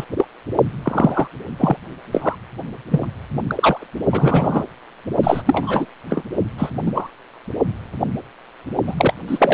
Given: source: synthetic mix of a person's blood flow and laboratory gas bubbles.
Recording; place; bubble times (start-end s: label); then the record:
Doppler ultrasound of blood flow; precordium
0.00-0.05 s: bubbles
0.17-0.25 s: bubbles
0.82-1.28 s: bubbles
1.58-1.77 s: bubbles
2.11-2.35 s: bubbles
2.91-3.07 s: bubbles
3.47-3.87 s: bubbles
4.12-4.64 s: bubbles
5.23-5.42 s: bubbles
5.46-5.86 s: bubbles
6.09-6.25 s: bubbles
6.58-6.70 s: bubbles
6.86-7.11 s: bubbles
8.87-9.13 s: bubbles
9.27-9.54 s: bubbles
From the record:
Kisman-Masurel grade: 233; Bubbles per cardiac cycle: several, 3 to 8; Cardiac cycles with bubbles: 50 to 99%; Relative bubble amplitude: loud (0.450 to 0.775); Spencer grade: 3 (all of the cardiac periods contain showers or single bubble signals, but not dominating or overriding the cardiac motion signals); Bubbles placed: only in the low amplitude regions of the cardiac cycle